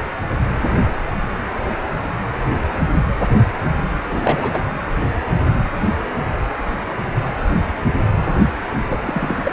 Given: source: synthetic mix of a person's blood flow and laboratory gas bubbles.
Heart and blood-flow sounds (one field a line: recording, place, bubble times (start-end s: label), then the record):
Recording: Doppler ultrasound of blood flow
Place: precordium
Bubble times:
4.09-4.51 s: bubbles
4.53-4.64 s: bubbles
8.88-9.52 s: bubbles
From the record:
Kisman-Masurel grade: 222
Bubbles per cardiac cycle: several, 3 to 8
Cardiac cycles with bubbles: 10 to 50%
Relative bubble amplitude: moderate (0.250 to 0.450)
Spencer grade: 2 (many but less than half of the cardiac periods contain bubble signals, singularly or in groups)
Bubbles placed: anywhere in the cardiac cycle